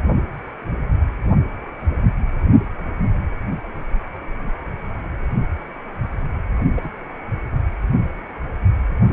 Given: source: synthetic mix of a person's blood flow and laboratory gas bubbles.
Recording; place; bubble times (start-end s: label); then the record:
Doppler ultrasound of blood flow; precordium
6.78-6.91 s: bubbles
From the record:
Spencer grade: 1 (occasional bubble signal discernible with the cardiac motion signal, with majority of cardiac periods free of bubbles); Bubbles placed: anywhere in the cardiac cycle